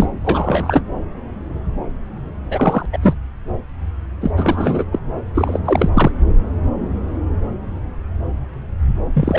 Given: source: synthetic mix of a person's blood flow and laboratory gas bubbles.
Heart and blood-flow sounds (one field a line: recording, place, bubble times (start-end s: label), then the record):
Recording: Doppler ultrasound of blood flow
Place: subclavian vein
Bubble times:
0.00-0.08 s: bubbles
0.24-0.81 s: bubbles
2.50-2.85 s: bubbles
2.92-2.99 s: bubbles
3.02-3.17 s: bubbles
4.21-4.30 s: bubbles
4.36-4.85 s: bubbles
4.92-4.99 s: bubbles
5.34-5.59 s: bubbles
5.65-5.90 s: bubbles
5.94-6.11 s: bubbles
9.13-9.39 s: bubbles
From the record:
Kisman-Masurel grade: 333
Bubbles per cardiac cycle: rolling drumbeat, 9 or more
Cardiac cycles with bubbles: 50 to 99%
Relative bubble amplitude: loud (0.450 to 0.775)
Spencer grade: 3 (all of the cardiac periods contain showers or single bubble signals, but not dominating or overriding the cardiac motion signals)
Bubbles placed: anywhere in the cardiac cycle